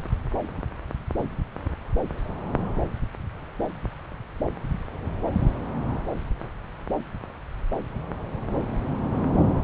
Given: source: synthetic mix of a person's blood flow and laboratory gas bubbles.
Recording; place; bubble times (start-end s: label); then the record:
Doppler ultrasound of blood flow; subclavian vein
no bubbles
From the record:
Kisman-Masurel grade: 000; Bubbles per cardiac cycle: 0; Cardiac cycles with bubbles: 0%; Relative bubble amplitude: no bubbles discernible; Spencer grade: 0 (complete lack of bubble signals)